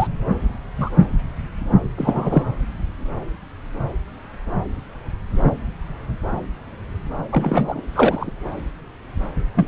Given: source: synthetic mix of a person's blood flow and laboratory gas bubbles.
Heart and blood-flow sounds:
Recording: Doppler ultrasound of blood flow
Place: subclavian vein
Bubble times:
0.00-0.08 s: bubbles
0.78-0.91 s: bubbles
1.97-2.44 s: bubbles
7.31-7.81 s: bubbles
7.95-8.33 s: bubbles
9.54-9.68 s: bubbles
From the record:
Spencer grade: 2 (many but less than half of the cardiac periods contain bubble signals, singularly or in groups)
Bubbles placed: anywhere in the cardiac cycle

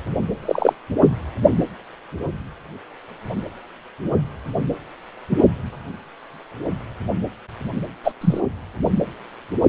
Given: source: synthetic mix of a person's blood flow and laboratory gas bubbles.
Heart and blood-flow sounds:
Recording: Doppler ultrasound of blood flow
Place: precordium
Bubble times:
0.42-0.75 s: bubbles
5.29-5.44 s: bubbles
8.04-8.12 s: bubbles
8.21-8.40 s: bubbles
From the record:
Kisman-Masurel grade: 123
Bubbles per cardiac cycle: 1 to 2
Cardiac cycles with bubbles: 10 to 50%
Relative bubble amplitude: loud (0.450 to 0.775)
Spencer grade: 2 (many but less than half of the cardiac periods contain bubble signals, singularly or in groups)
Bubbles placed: anywhere in the cardiac cycle

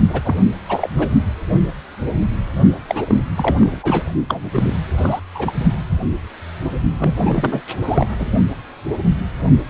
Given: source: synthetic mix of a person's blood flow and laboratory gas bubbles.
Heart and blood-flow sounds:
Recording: Doppler ultrasound of blood flow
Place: precordium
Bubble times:
0.09-0.20 s: bubbles
0.23-0.35 s: bubbles
0.68-0.90 s: bubbles
0.97-1.08 s: bubbles
2.88-3.23 s: bubbles
3.35-3.80 s: bubbles
3.83-4.04 s: bubbles
4.28-4.40 s: bubbles
4.53-4.74 s: bubbles
4.97-5.20 s: bubbles
5.34-5.54 s: bubbles
6.97-7.61 s: bubbles
7.82-8.06 s: bubbles
8.18-8.32 s: bubbles
From the record:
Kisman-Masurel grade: 332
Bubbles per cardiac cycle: rolling drumbeat, 9 or more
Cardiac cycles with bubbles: 50 to 99%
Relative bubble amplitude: moderate (0.250 to 0.450)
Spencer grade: 3 (all of the cardiac periods contain showers or single bubble signals, but not dominating or overriding the cardiac motion signals)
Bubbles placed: only in the low amplitude regions of the cardiac cycle

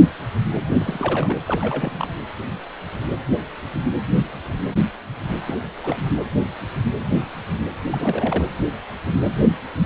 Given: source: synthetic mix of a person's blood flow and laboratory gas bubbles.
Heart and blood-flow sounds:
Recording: Doppler ultrasound of blood flow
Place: precordium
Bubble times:
0.78-1.36 s: bubbles
1.47-1.93 s: bubbles
1.98-2.07 s: bubbles
5.48-5.58 s: bubbles
5.83-6.02 s: bubbles
7.87-8.45 s: bubbles
From the record:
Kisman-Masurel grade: 221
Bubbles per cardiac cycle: several, 3 to 8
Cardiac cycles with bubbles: 10 to 50%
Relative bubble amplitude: barely perceptible (0.100 to 0.250)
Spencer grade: 2 (many but less than half of the cardiac periods contain bubble signals, singularly or in groups)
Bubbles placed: anywhere in the cardiac cycle

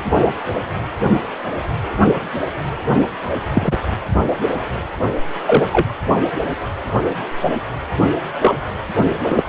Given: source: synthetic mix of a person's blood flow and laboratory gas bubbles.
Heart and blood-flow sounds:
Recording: Doppler ultrasound of blood flow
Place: precordium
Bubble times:
3.54-3.73 s: bubbles
5.47-5.66 s: bubbles
5.72-5.87 s: bubbles
8.41-8.54 s: bubbles
9.22-9.42 s: bubbles
From the record:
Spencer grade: 2 (many but less than half of the cardiac periods contain bubble signals, singularly or in groups)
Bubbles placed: only in the low amplitude regions of the cardiac cycle

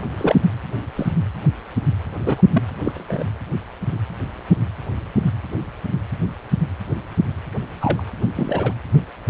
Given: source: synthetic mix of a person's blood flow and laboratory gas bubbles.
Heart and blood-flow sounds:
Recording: Doppler ultrasound of blood flow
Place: precordium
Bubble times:
0.17-0.36 s: bubbles
0.95-1.11 s: bubbles
2.15-2.42 s: bubbles
2.52-2.62 s: bubbles
2.78-3.24 s: bubbles
7.81-8.03 s: bubbles
8.36-8.73 s: bubbles
From the record:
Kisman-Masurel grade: 122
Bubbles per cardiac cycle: 1 to 2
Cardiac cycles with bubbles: 10 to 50%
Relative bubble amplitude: moderate (0.250 to 0.450)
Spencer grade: 2 (many but less than half of the cardiac periods contain bubble signals, singularly or in groups)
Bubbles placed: anywhere in the cardiac cycle

